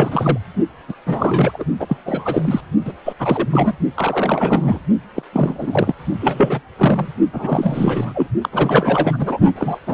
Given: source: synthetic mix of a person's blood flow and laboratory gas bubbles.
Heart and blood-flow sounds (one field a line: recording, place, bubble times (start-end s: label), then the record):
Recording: Doppler ultrasound of blood flow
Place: precordium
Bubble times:
0.00-0.38 s: bubbles
0.88-0.94 s: bubbles
1.06-1.65 s: bubbles
1.79-1.86 s: bubbles
1.89-1.97 s: bubbles
2.06-2.60 s: bubbles
2.85-2.92 s: bubbles
3.04-3.13 s: bubbles
3.19-3.73 s: bubbles
3.95-4.80 s: bubbles
5.15-5.23 s: bubbles
5.33-5.95 s: bubbles
6.20-6.61 s: bubbles
6.77-7.08 s: bubbles
7.33-8.27 s: bubbles
8.41-8.49 s: bubbles
8.52-9.39 s: bubbles
9.55-9.79 s: bubbles
9.87-9.94 s: bubbles
From the record:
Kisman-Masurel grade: 343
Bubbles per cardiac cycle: rolling drumbeat, 9 or more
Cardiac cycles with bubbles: 100%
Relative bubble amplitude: loud (0.450 to 0.775)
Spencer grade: 3 (all of the cardiac periods contain showers or single bubble signals, but not dominating or overriding the cardiac motion signals)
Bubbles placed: only in the low amplitude regions of the cardiac cycle